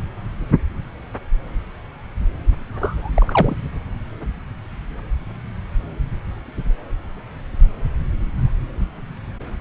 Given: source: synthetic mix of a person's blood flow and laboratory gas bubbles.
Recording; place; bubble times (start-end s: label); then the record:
Doppler ultrasound of blood flow; subclavian vein
2.71-3.11 s: bubbles
3.15-3.56 s: bubbles
From the record:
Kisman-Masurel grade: 222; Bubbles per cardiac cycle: several, 3 to 8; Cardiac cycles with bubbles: 10 to 50%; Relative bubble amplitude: moderate (0.250 to 0.450); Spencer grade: 2 (many but less than half of the cardiac periods contain bubble signals, singularly or in groups); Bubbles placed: anywhere in the cardiac cycle